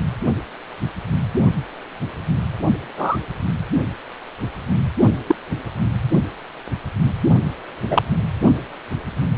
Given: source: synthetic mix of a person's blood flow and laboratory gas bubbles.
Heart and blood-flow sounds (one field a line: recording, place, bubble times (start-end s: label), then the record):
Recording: Doppler ultrasound of blood flow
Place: precordium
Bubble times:
2.97-3.18 s: bubbles
5.26-5.35 s: bubbles
7.90-8.03 s: bubbles
From the record:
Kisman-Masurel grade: 123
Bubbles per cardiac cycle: 1 to 2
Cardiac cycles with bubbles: 10 to 50%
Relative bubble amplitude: loud (0.450 to 0.775)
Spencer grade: 2 (many but less than half of the cardiac periods contain bubble signals, singularly or in groups)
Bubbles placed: only in the low amplitude regions of the cardiac cycle